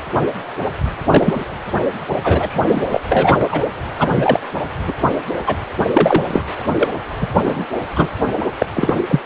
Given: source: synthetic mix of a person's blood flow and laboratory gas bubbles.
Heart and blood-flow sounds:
Doppler ultrasound of blood flow; precordium
1.06-1.44 s: bubbles
2.23-2.82 s: bubbles
2.91-3.00 s: bubbles
3.08-3.67 s: bubbles
3.97-4.40 s: bubbles
4.87-4.93 s: bubbles
5.46-5.57 s: bubbles
5.93-6.24 s: bubbles
6.31-6.44 s: bubbles
6.79-6.92 s: bubbles
7.21-7.27 s: bubbles
7.42-7.65 s: bubbles
7.96-8.08 s: bubbles
8.58-8.66 s: bubbles
8.73-8.93 s: bubbles
9.07-9.20 s: bubbles
From the record:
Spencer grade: 3 (all of the cardiac periods contain showers or single bubble signals, but not dominating or overriding the cardiac motion signals); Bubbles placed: anywhere in the cardiac cycle

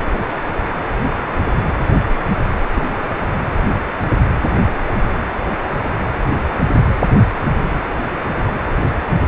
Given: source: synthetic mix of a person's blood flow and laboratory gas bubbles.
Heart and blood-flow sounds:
Doppler ultrasound of blood flow; precordium
2.74-3.22 s: bubbles
From the record:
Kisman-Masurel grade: 111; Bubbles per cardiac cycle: 1 to 2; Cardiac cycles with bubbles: 1 to 10%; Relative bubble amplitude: barely perceptible (0.100 to 0.250); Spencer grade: 1 (occasional bubble signal discernible with the cardiac motion signal, with majority of cardiac periods free of bubbles); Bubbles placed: anywhere in the cardiac cycle

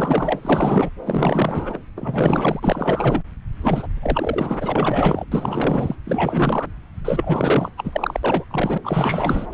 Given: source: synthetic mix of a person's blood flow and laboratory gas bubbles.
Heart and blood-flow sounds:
Doppler ultrasound of blood flow; subclavian vein
0.00-0.39 s: bubbles
0.41-0.90 s: bubbles
1.05-1.78 s: bubbles
1.96-2.60 s: bubbles
2.62-3.23 s: bubbles
3.61-3.88 s: bubbles
4.02-5.25 s: bubbles
5.31-5.95 s: bubbles
6.04-6.66 s: bubbles
7.04-7.70 s: bubbles
7.77-8.20 s: bubbles
8.23-8.45 s: bubbles
8.50-8.78 s: bubbles
8.83-9.46 s: bubbles
From the record:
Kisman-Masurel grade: 444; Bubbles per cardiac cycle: continuous sound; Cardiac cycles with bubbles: 100%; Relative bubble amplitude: maximal (0.775 to 0.999); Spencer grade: 4 (maximum detectable bubble signal sounding continuously throughout systole and diastole of every cardiac period, and overriding the amplitude of the normal cardiac signals); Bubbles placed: anywhere in the cardiac cycle

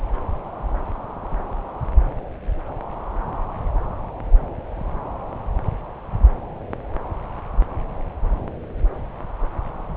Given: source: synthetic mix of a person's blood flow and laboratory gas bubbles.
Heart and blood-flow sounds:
Doppler ultrasound of blood flow; subclavian vein
no bubbles
From the record:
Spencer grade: 0 (complete lack of bubble signals)

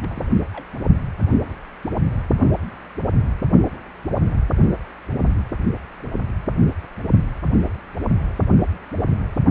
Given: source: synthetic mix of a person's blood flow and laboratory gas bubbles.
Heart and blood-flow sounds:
Doppler ultrasound of blood flow; precordium
0.02-0.34 s: bubbles
0.53-0.64 s: bubbles
From the record:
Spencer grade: 1 (occasional bubble signal discernible with the cardiac motion signal, with majority of cardiac periods free of bubbles); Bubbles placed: only in the low amplitude regions of the cardiac cycle

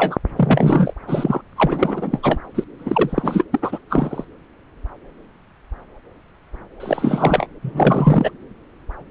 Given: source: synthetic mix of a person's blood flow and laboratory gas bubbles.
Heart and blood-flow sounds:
Doppler ultrasound of blood flow; subclavian vein
0.00-0.18 s: bubbles
0.36-0.93 s: bubbles
1.07-1.41 s: bubbles
1.56-2.40 s: bubbles
2.54-2.64 s: bubbles
2.78-3.44 s: bubbles
3.52-3.78 s: bubbles
3.90-4.25 s: bubbles
6.80-7.47 s: bubbles
7.62-8.31 s: bubbles
From the record:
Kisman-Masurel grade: 333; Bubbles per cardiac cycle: rolling drumbeat, 9 or more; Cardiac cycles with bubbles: 50 to 99%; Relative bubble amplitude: loud (0.450 to 0.775); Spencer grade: 3 (all of the cardiac periods contain showers or single bubble signals, but not dominating or overriding the cardiac motion signals); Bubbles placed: anywhere in the cardiac cycle

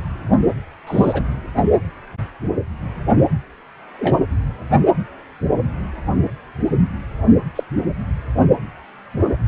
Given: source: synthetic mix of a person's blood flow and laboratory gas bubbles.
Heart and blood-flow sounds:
Doppler ultrasound of blood flow; precordium
0.86-1.23 s: bubbles
3.99-4.15 s: bubbles
7.56-7.63 s: bubbles
From the record:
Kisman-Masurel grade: 122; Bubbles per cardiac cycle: 1 to 2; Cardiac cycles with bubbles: 10 to 50%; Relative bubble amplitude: moderate (0.250 to 0.450); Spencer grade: 2 (many but less than half of the cardiac periods contain bubble signals, singularly or in groups); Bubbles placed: only in the low amplitude regions of the cardiac cycle

